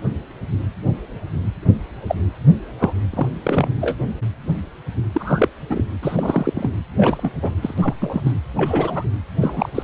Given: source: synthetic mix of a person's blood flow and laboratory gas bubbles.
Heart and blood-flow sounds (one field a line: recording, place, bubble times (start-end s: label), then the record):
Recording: Doppler ultrasound of blood flow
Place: precordium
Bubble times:
2.07-2.15 s: bubbles
2.79-2.93 s: bubbles
3.12-3.26 s: bubbles
3.43-3.69 s: bubbles
3.81-3.96 s: bubbles
5.12-5.49 s: bubbles
5.70-5.84 s: bubbles
6.02-6.70 s: bubbles
6.96-7.32 s: bubbles
7.42-7.50 s: bubbles
7.62-7.75 s: bubbles
7.78-7.95 s: bubbles
8.01-8.22 s: bubbles
8.25-8.34 s: bubbles
8.57-9.04 s: bubbles
9.41-9.69 s: bubbles
9.75-9.83 s: bubbles
From the record:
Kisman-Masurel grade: 233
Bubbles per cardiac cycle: several, 3 to 8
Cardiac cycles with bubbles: 50 to 99%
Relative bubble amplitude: loud (0.450 to 0.775)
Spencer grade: 3 (all of the cardiac periods contain showers or single bubble signals, but not dominating or overriding the cardiac motion signals)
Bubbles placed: anywhere in the cardiac cycle